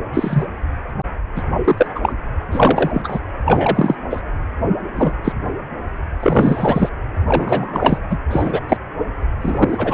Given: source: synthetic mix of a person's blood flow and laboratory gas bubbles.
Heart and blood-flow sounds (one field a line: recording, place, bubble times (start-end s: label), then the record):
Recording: Doppler ultrasound of blood flow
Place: precordium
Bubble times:
0.14-0.45 s: bubbles
1.35-1.42 s: bubbles
1.64-1.86 s: bubbles
1.95-2.14 s: bubbles
2.52-3.19 s: bubbles
3.45-3.98 s: bubbles
4.10-4.21 s: bubbles
4.96-5.12 s: bubbles
5.24-5.33 s: bubbles
6.19-6.89 s: bubbles
7.27-7.98 s: bubbles
8.11-8.17 s: bubbles
8.31-8.61 s: bubbles
8.69-8.77 s: bubbles
9.41-9.94 s: bubbles
From the record:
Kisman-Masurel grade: 243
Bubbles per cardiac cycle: several, 3 to 8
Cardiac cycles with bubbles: 100%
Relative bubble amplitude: loud (0.450 to 0.775)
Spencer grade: 3 (all of the cardiac periods contain showers or single bubble signals, but not dominating or overriding the cardiac motion signals)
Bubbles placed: anywhere in the cardiac cycle